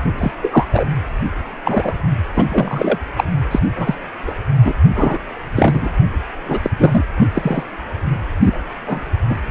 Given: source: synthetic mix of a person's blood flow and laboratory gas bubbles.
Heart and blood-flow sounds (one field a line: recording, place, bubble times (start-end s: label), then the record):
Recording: Doppler ultrasound of blood flow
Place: precordium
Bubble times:
0.03-0.11 s: bubbles
0.18-0.32 s: bubbles
0.42-0.67 s: bubbles
0.72-0.84 s: bubbles
1.65-1.94 s: bubbles
2.34-2.45 s: bubbles
2.48-2.98 s: bubbles
3.17-3.24 s: bubbles
3.51-3.59 s: bubbles
3.75-3.95 s: bubbles
4.26-4.34 s: bubbles
4.64-4.73 s: bubbles
4.95-5.18 s: bubbles
5.55-5.89 s: bubbles
6.48-6.59 s: bubbles
6.62-6.70 s: bubbles
6.77-7.04 s: bubbles
7.19-7.29 s: bubbles
7.34-7.63 s: bubbles
8.45-8.60 s: bubbles
8.86-9.01 s: bubbles
9.29-9.38 s: bubbles
From the record:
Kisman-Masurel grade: 233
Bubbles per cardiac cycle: several, 3 to 8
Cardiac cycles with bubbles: 50 to 99%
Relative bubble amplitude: loud (0.450 to 0.775)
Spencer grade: 3 (all of the cardiac periods contain showers or single bubble signals, but not dominating or overriding the cardiac motion signals)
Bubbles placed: anywhere in the cardiac cycle